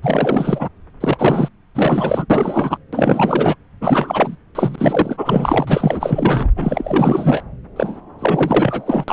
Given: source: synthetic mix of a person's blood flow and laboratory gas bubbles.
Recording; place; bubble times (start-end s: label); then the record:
Doppler ultrasound of blood flow; subclavian vein
0.03-0.69 s: bubbles
1.00-1.48 s: bubbles
1.75-2.25 s: bubbles
2.29-2.77 s: bubbles
2.92-3.55 s: bubbles
3.81-4.37 s: bubbles
4.55-6.49 s: bubbles
6.56-7.43 s: bubbles
7.76-8.00 s: bubbles
8.19-9.04 s: bubbles
9.08-9.13 s: bubbles
From the record:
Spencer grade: 4 (maximum detectable bubble signal sounding continuously throughout systole and diastole of every cardiac period, and overriding the amplitude of the normal cardiac signals); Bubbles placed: anywhere in the cardiac cycle